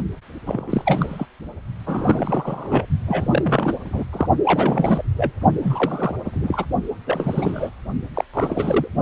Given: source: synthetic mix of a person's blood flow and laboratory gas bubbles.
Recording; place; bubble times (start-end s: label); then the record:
Doppler ultrasound of blood flow; precordium
0.46-1.26 s: bubbles
1.87-2.85 s: bubbles
3.06-3.77 s: bubbles
3.85-4.04 s: bubbles
4.12-4.28 s: bubbles
4.45-5.02 s: bubbles
5.16-5.32 s: bubbles
5.62-6.13 s: bubbles
6.25-6.65 s: bubbles
7.05-7.70 s: bubbles
8.13-8.24 s: bubbles
8.33-8.88 s: bubbles
From the record:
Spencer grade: 3 (all of the cardiac periods contain showers or single bubble signals, but not dominating or overriding the cardiac motion signals); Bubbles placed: only in the low amplitude regions of the cardiac cycle